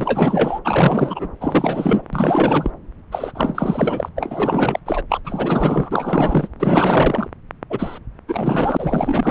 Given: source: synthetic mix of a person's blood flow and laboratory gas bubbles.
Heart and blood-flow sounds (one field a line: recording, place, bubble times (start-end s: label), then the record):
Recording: Doppler ultrasound of blood flow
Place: subclavian vein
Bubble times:
0.00-0.60 s: bubbles
0.64-1.28 s: bubbles
1.41-2.03 s: bubbles
2.12-2.71 s: bubbles
3.11-3.32 s: bubbles
3.34-4.09 s: bubbles
4.17-4.79 s: bubbles
4.86-5.01 s: bubbles
5.09-5.21 s: bubbles
5.24-6.48 s: bubbles
6.60-7.27 s: bubbles
7.69-7.99 s: bubbles
8.28-9.30 s: bubbles
From the record:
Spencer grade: 4 (maximum detectable bubble signal sounding continuously throughout systole and diastole of every cardiac period, and overriding the amplitude of the normal cardiac signals)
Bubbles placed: anywhere in the cardiac cycle